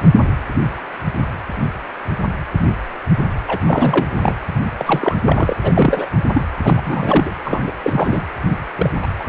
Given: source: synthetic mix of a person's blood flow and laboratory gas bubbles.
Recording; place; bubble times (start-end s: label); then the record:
Doppler ultrasound of blood flow; precordium
3.47-3.61 s: bubbles
3.67-4.34 s: bubbles
4.78-5.15 s: bubbles
5.24-5.54 s: bubbles
5.62-6.07 s: bubbles
6.33-6.42 s: bubbles
6.63-6.82 s: bubbles
6.84-7.30 s: bubbles
7.45-7.63 s: bubbles
7.67-7.73 s: bubbles
7.83-8.22 s: bubbles
8.75-8.89 s: bubbles
9.02-9.07 s: bubbles
9.19-9.29 s: bubbles
From the record:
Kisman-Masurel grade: 332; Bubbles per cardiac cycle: rolling drumbeat, 9 or more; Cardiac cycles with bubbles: 50 to 99%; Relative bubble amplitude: moderate (0.250 to 0.450); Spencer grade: 3 (all of the cardiac periods contain showers or single bubble signals, but not dominating or overriding the cardiac motion signals); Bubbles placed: anywhere in the cardiac cycle